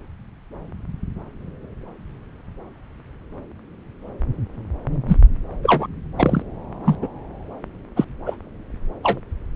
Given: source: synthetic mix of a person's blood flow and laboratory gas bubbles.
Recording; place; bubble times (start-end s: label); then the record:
Doppler ultrasound of blood flow; subclavian vein
5.08-5.20 s: bubbles
5.63-5.87 s: bubbles
6.17-6.42 s: bubbles
6.85-6.96 s: bubbles
7.01-7.08 s: bubbles
7.96-8.04 s: bubbles
8.26-8.36 s: bubbles
9.03-9.19 s: bubbles
From the record:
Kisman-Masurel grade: 123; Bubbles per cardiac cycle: 1 to 2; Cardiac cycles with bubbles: 10 to 50%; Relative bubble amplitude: loud (0.450 to 0.775); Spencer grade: 2 (many but less than half of the cardiac periods contain bubble signals, singularly or in groups); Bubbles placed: anywhere in the cardiac cycle